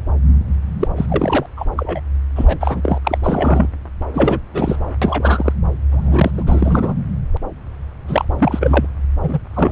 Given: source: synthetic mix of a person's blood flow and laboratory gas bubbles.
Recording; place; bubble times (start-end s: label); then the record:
Doppler ultrasound of blood flow; subclavian vein
0.79-0.88 s: bubbles
0.96-1.06 s: bubbles
1.08-1.46 s: bubbles
1.56-1.65 s: bubbles
1.77-2.00 s: bubbles
2.35-2.98 s: bubbles
3.05-3.18 s: bubbles
3.23-3.68 s: bubbles
4.13-4.39 s: bubbles
4.53-4.76 s: bubbles
5.01-5.53 s: bubbles
5.91-6.31 s: bubbles
6.34-6.43 s: bubbles
6.46-6.94 s: bubbles
8.07-8.25 s: bubbles
8.38-8.86 s: bubbles
9.22-9.39 s: bubbles
9.54-9.72 s: bubbles
From the record:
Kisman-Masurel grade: 333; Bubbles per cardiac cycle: rolling drumbeat, 9 or more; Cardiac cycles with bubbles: 50 to 99%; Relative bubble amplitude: loud (0.450 to 0.775); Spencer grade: 3 (all of the cardiac periods contain showers or single bubble signals, but not dominating or overriding the cardiac motion signals); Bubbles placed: anywhere in the cardiac cycle